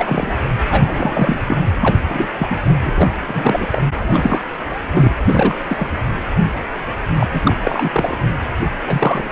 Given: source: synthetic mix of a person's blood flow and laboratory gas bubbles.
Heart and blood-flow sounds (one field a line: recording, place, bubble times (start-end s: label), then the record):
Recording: Doppler ultrasound of blood flow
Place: precordium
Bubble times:
0.00-0.33 s: bubbles
0.70-1.42 s: bubbles
1.47-1.62 s: bubbles
1.80-1.98 s: bubbles
2.10-2.28 s: bubbles
2.39-2.58 s: bubbles
2.64-2.77 s: bubbles
2.83-3.12 s: bubbles
3.27-3.80 s: bubbles
3.99-4.44 s: bubbles
4.71-4.78 s: bubbles
4.93-5.14 s: bubbles
5.25-5.57 s: bubbles
5.69-5.89 s: bubbles
7.19-7.27 s: bubbles
7.30-7.41 s: bubbles
7.45-7.55 s: bubbles
7.64-8.18 s: bubbles
8.84-9.28 s: bubbles
From the record:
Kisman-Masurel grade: 343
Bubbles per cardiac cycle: rolling drumbeat, 9 or more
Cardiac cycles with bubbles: 100%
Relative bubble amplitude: loud (0.450 to 0.775)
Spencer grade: 3 (all of the cardiac periods contain showers or single bubble signals, but not dominating or overriding the cardiac motion signals)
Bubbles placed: anywhere in the cardiac cycle